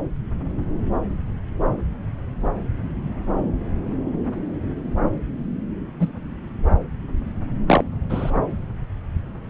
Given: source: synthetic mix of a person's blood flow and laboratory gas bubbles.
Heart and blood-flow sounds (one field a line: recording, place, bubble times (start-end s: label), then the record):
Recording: Doppler ultrasound of blood flow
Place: subclavian vein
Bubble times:
6.00-6.08 s: bubbles
7.67-7.83 s: bubbles
8.10-8.31 s: bubbles
From the record:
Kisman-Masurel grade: 123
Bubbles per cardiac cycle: 1 to 2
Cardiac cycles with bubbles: 10 to 50%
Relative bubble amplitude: loud (0.450 to 0.775)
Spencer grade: 2 (many but less than half of the cardiac periods contain bubble signals, singularly or in groups)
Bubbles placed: anywhere in the cardiac cycle